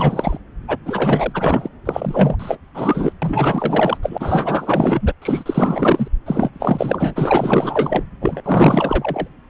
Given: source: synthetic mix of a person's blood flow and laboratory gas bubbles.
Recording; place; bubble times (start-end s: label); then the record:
Doppler ultrasound of blood flow; subclavian vein
0.00-0.38 s: bubbles
0.68-0.77 s: bubbles
0.85-1.68 s: bubbles
1.85-2.58 s: bubbles
2.74-3.12 s: bubbles
3.22-3.99 s: bubbles
4.02-5.13 s: bubbles
5.21-6.08 s: bubbles
6.25-6.50 s: bubbles
6.53-8.04 s: bubbles
8.21-8.41 s: bubbles
8.44-9.27 s: bubbles
From the record:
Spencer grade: 4 (maximum detectable bubble signal sounding continuously throughout systole and diastole of every cardiac period, and overriding the amplitude of the normal cardiac signals); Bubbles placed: anywhere in the cardiac cycle